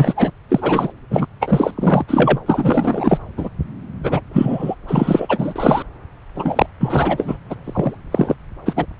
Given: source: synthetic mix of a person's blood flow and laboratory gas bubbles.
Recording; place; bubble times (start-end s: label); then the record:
Doppler ultrasound of blood flow; subclavian vein
0.00-0.30 s: bubbles
0.49-0.93 s: bubbles
1.10-1.26 s: bubbles
1.41-2.05 s: bubbles
2.08-2.40 s: bubbles
2.46-3.19 s: bubbles
3.37-3.49 s: bubbles
4.04-4.21 s: bubbles
4.33-4.75 s: bubbles
4.88-5.83 s: bubbles
6.35-6.66 s: bubbles
6.79-7.38 s: bubbles
7.50-7.55 s: bubbles
7.64-7.97 s: bubbles
8.12-8.34 s: bubbles
8.65-8.73 s: bubbles
8.76-8.85 s: bubbles
From the record:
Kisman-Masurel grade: 343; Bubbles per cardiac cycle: rolling drumbeat, 9 or more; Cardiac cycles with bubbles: 100%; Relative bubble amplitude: loud (0.450 to 0.775); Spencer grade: 3 (all of the cardiac periods contain showers or single bubble signals, but not dominating or overriding the cardiac motion signals); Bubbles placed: anywhere in the cardiac cycle